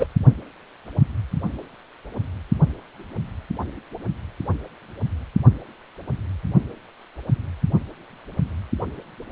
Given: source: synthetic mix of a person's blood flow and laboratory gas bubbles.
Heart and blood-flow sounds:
Doppler ultrasound of blood flow; precordium
0.00-0.07 s: bubbles
From the record:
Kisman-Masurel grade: 113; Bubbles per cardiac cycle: 1 to 2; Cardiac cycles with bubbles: 1 to 10%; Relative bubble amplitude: loud (0.450 to 0.775); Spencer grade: 1 (occasional bubble signal discernible with the cardiac motion signal, with majority of cardiac periods free of bubbles); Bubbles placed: only in the low amplitude regions of the cardiac cycle

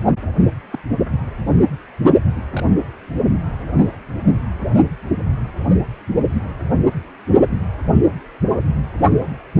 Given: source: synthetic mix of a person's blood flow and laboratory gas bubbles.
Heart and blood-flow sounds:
Doppler ultrasound of blood flow; precordium
0.71-0.79 s: bubbles
2.53-2.64 s: bubbles
From the record:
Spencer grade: 2 (many but less than half of the cardiac periods contain bubble signals, singularly or in groups); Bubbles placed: only in the low amplitude regions of the cardiac cycle

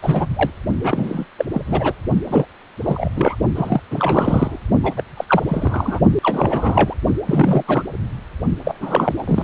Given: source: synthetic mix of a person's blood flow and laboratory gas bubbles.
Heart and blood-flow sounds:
Doppler ultrasound of blood flow; precordium
0.02-0.27 s: bubbles
0.36-0.50 s: bubbles
0.83-1.25 s: bubbles
1.38-1.45 s: bubbles
1.54-1.62 s: bubbles
1.67-1.93 s: bubbles
2.27-2.45 s: bubbles
2.83-3.08 s: bubbles
3.16-3.35 s: bubbles
3.55-3.81 s: bubbles
3.90-4.58 s: bubbles
4.83-4.94 s: bubbles
4.97-5.04 s: bubbles
5.17-5.25 s: bubbles
5.27-5.43 s: bubbles
5.48-6.00 s: bubbles
6.23-6.94 s: bubbles
7.26-7.62 s: bubbles
7.68-7.83 s: bubbles
8.65-9.15 s: bubbles
9.19-9.44 s: bubbles
From the record:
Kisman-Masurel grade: 332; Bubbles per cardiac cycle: rolling drumbeat, 9 or more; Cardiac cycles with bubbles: 50 to 99%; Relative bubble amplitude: moderate (0.250 to 0.450); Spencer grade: 3 (all of the cardiac periods contain showers or single bubble signals, but not dominating or overriding the cardiac motion signals); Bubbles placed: only in the low amplitude regions of the cardiac cycle

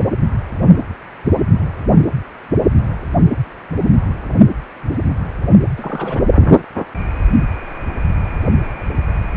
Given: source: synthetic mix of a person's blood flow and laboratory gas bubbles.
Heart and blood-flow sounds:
Doppler ultrasound of blood flow; precordium
5.77-6.23 s: bubbles
From the record:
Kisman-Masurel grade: 212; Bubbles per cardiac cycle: several, 3 to 8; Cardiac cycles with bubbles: 1 to 10%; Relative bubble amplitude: moderate (0.250 to 0.450); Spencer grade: 1 (occasional bubble signal discernible with the cardiac motion signal, with majority of cardiac periods free of bubbles); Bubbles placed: anywhere in the cardiac cycle

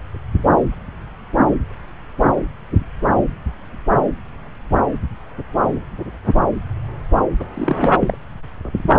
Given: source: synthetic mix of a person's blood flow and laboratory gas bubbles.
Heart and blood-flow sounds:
Doppler ultrasound of blood flow; subclavian vein
7.39-7.44 s: bubbles
7.54-7.89 s: bubbles
8.00-8.17 s: bubbles
From the record:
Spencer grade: 1 (occasional bubble signal discernible with the cardiac motion signal, with majority of cardiac periods free of bubbles); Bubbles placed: anywhere in the cardiac cycle

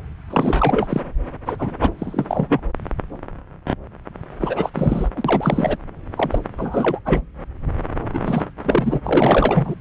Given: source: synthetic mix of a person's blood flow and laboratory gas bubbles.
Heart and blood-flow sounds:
Doppler ultrasound of blood flow; subclavian vein
0.30-1.01 s: bubbles
1.46-1.74 s: bubbles
1.80-1.91 s: bubbles
1.99-2.61 s: bubbles
4.41-4.70 s: bubbles
4.74-5.08 s: bubbles
5.15-5.78 s: bubbles
6.16-6.38 s: bubbles
6.58-7.00 s: bubbles
7.05-7.21 s: bubbles
8.13-8.44 s: bubbles
8.62-9.00 s: bubbles
9.04-9.76 s: bubbles
From the record:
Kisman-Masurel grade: 333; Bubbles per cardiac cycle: rolling drumbeat, 9 or more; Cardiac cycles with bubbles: 50 to 99%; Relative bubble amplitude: loud (0.450 to 0.775); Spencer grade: 3 (all of the cardiac periods contain showers or single bubble signals, but not dominating or overriding the cardiac motion signals); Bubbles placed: anywhere in the cardiac cycle

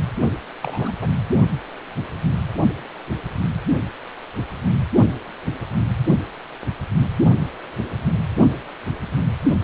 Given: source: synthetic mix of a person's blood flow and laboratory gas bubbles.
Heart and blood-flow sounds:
Doppler ultrasound of blood flow; precordium
0.26-0.34 s: bubbles
0.61-0.94 s: bubbles
1.01-1.08 s: bubbles
From the record:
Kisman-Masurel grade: 222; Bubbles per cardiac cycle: several, 3 to 8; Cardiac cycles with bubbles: 10 to 50%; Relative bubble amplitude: moderate (0.250 to 0.450); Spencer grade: 2 (many but less than half of the cardiac periods contain bubble signals, singularly or in groups); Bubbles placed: only in the low amplitude regions of the cardiac cycle

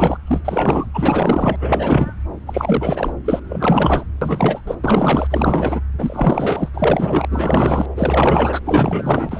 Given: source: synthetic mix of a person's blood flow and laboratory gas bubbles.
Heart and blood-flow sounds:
Doppler ultrasound of blood flow; subclavian vein
0.00-0.17 s: bubbles
0.27-0.41 s: bubbles
0.45-0.86 s: bubbles
0.94-1.56 s: bubbles
1.61-2.11 s: bubbles
2.46-3.12 s: bubbles
3.24-3.40 s: bubbles
3.48-4.04 s: bubbles
4.21-4.62 s: bubbles
4.67-4.75 s: bubbles
4.83-5.27 s: bubbles
5.30-5.81 s: bubbles
5.98-6.68 s: bubbles
6.73-7.87 s: bubbles
7.96-8.61 s: bubbles
8.65-9.40 s: bubbles
From the record:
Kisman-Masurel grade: 444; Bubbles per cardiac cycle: continuous sound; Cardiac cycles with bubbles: 100%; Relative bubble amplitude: maximal (0.775 to 0.999); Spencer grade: 4 (maximum detectable bubble signal sounding continuously throughout systole and diastole of every cardiac period, and overriding the amplitude of the normal cardiac signals); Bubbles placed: anywhere in the cardiac cycle

